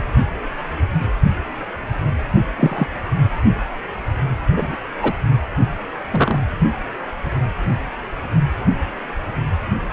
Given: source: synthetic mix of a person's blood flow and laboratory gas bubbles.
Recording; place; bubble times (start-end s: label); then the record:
Doppler ultrasound of blood flow; precordium
2.59-2.87 s: bubbles
4.57-4.76 s: bubbles
5.02-5.12 s: bubbles
6.11-6.39 s: bubbles
From the record:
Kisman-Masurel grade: 123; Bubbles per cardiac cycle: 1 to 2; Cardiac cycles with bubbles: 10 to 50%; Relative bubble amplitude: loud (0.450 to 0.775); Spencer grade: 2 (many but less than half of the cardiac periods contain bubble signals, singularly or in groups); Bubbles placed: anywhere in the cardiac cycle